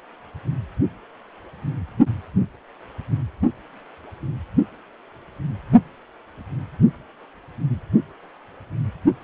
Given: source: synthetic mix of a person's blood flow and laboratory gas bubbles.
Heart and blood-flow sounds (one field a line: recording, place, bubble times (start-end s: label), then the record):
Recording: Doppler ultrasound of blood flow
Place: precordium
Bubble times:
no bubbles
From the record:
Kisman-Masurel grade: 000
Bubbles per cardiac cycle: 0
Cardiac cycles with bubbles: 0%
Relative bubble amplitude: no bubbles discernible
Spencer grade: 0 (complete lack of bubble signals)